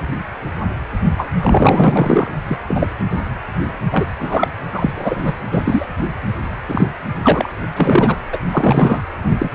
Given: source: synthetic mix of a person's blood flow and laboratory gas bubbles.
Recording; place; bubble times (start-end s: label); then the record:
Doppler ultrasound of blood flow; precordium
1.17-1.29 s: bubbles
1.41-2.30 s: bubbles
2.48-2.58 s: bubbles
2.69-2.87 s: bubbles
3.92-4.05 s: bubbles
4.20-4.48 s: bubbles
4.73-5.34 s: bubbles
5.50-5.87 s: bubbles
6.68-6.88 s: bubbles
7.23-7.49 s: bubbles
7.76-8.16 s: bubbles
8.32-8.39 s: bubbles
8.51-9.02 s: bubbles
9.38-9.50 s: bubbles
From the record:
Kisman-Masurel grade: 233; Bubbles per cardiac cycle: several, 3 to 8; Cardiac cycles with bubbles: 50 to 99%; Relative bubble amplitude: loud (0.450 to 0.775); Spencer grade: 3 (all of the cardiac periods contain showers or single bubble signals, but not dominating or overriding the cardiac motion signals); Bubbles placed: anywhere in the cardiac cycle